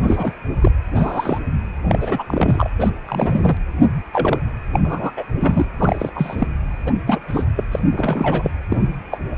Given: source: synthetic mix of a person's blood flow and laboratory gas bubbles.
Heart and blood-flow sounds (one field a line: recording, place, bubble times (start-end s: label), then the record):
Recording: Doppler ultrasound of blood flow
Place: precordium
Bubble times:
0.06-0.34 s: bubbles
0.61-0.71 s: bubbles
0.95-1.39 s: bubbles
1.89-2.24 s: bubbles
2.28-2.70 s: bubbles
2.79-2.89 s: bubbles
3.07-3.57 s: bubbles
4.12-4.38 s: bubbles
4.72-4.80 s: bubbles
4.83-5.11 s: bubbles
5.17-5.23 s: bubbles
5.35-5.66 s: bubbles
5.79-6.09 s: bubbles
6.15-6.47 s: bubbles
6.86-6.93 s: bubbles
7.07-7.18 s: bubbles
7.28-7.46 s: bubbles
7.56-7.64 s: bubbles
7.71-7.79 s: bubbles
7.90-8.52 s: bubbles
8.69-8.90 s: bubbles
9.11-9.19 s: bubbles
From the record:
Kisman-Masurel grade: 242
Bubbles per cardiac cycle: several, 3 to 8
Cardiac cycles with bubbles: 100%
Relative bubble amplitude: moderate (0.250 to 0.450)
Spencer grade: 3 (all of the cardiac periods contain showers or single bubble signals, but not dominating or overriding the cardiac motion signals)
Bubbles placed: anywhere in the cardiac cycle